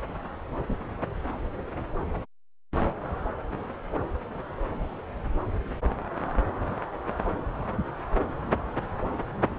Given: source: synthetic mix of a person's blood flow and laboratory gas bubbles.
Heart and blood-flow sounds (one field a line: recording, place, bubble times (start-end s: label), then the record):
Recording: Doppler ultrasound of blood flow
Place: subclavian vein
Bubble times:
0.69-0.76 s: bubbles
From the record:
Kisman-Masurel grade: 111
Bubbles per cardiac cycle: 1 to 2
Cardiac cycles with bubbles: 1 to 10%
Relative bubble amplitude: barely perceptible (0.100 to 0.250)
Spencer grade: 1 (occasional bubble signal discernible with the cardiac motion signal, with majority of cardiac periods free of bubbles)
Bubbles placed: anywhere in the cardiac cycle